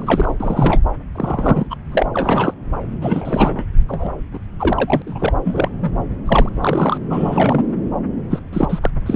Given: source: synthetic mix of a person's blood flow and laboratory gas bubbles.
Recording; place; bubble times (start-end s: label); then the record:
Doppler ultrasound of blood flow; subclavian vein
0.00-0.35 s: bubbles
0.40-0.81 s: bubbles
1.15-1.67 s: bubbles
1.70-1.75 s: bubbles
1.92-2.06 s: bubbles
2.14-2.54 s: bubbles
3.01-3.64 s: bubbles
3.88-4.12 s: bubbles
4.33-4.39 s: bubbles
4.59-5.02 s: bubbles
5.06-5.33 s: bubbles
5.45-5.68 s: bubbles
5.83-5.91 s: bubbles
6.25-6.49 s: bubbles
6.60-6.97 s: bubbles
7.10-7.63 s: bubbles
8.30-8.40 s: bubbles
8.53-8.79 s: bubbles
8.82-8.91 s: bubbles
9.06-9.16 s: bubbles
From the record:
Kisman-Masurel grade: 242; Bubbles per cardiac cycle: several, 3 to 8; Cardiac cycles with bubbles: 100%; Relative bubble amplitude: moderate (0.250 to 0.450); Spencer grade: 3 (all of the cardiac periods contain showers or single bubble signals, but not dominating or overriding the cardiac motion signals); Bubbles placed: anywhere in the cardiac cycle